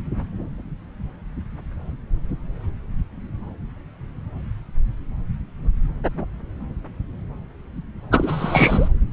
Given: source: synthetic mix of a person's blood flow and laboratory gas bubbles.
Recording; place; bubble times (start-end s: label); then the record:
Doppler ultrasound of blood flow; subclavian vein
8.11-8.88 s: bubbles
From the record:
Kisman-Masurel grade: 212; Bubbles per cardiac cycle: several, 3 to 8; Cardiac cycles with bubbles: 1 to 10%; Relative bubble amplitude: moderate (0.250 to 0.450); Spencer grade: 1 (occasional bubble signal discernible with the cardiac motion signal, with majority of cardiac periods free of bubbles); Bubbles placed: anywhere in the cardiac cycle